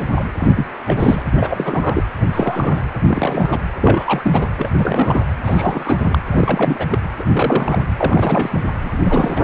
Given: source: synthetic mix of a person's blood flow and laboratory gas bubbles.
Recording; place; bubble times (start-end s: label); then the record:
Doppler ultrasound of blood flow; precordium
0.00-0.04 s: bubbles
0.15-0.24 s: bubbles
0.37-0.66 s: bubbles
0.85-1.23 s: bubbles
1.37-2.04 s: bubbles
2.20-2.26 s: bubbles
2.32-2.83 s: bubbles
3.08-3.60 s: bubbles
3.80-4.49 s: bubbles
4.57-4.70 s: bubbles
4.75-5.21 s: bubbles
5.45-6.18 s: bubbles
6.31-6.98 s: bubbles
7.19-7.23 s: bubbles
7.32-7.82 s: bubbles
7.98-8.60 s: bubbles
8.82-9.01 s: bubbles
9.04-9.41 s: bubbles
From the record:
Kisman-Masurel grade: 332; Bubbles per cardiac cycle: rolling drumbeat, 9 or more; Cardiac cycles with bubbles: 50 to 99%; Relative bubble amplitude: moderate (0.250 to 0.450); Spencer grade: 3 (all of the cardiac periods contain showers or single bubble signals, but not dominating or overriding the cardiac motion signals); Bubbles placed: anywhere in the cardiac cycle